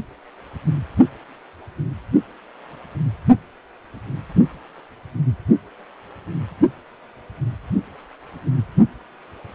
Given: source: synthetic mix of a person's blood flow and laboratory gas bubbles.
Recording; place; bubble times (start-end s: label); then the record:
Doppler ultrasound of blood flow; precordium
no bubbles
From the record:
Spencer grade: 0 (complete lack of bubble signals)